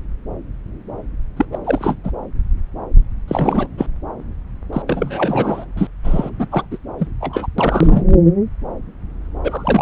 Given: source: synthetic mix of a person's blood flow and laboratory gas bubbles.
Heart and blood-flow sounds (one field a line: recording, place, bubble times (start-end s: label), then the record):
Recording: Doppler ultrasound of blood flow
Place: subclavian vein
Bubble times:
1.36-1.45 s: bubbles
1.52-1.58 s: bubbles
1.65-1.96 s: bubbles
2.03-2.11 s: bubbles
3.27-3.68 s: bubbles
3.77-3.87 s: bubbles
4.72-4.82 s: bubbles
4.87-5.66 s: bubbles
5.76-5.87 s: bubbles
6.04-6.30 s: bubbles
6.38-6.46 s: bubbles
6.51-6.65 s: bubbles
6.71-6.78 s: bubbles
6.98-7.08 s: bubbles
7.21-7.47 s: bubbles
7.58-8.03 s: bubbles
9.44-9.82 s: bubbles
From the record:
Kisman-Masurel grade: 333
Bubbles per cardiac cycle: rolling drumbeat, 9 or more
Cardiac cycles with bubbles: 50 to 99%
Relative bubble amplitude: loud (0.450 to 0.775)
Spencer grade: 3 (all of the cardiac periods contain showers or single bubble signals, but not dominating or overriding the cardiac motion signals)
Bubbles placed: anywhere in the cardiac cycle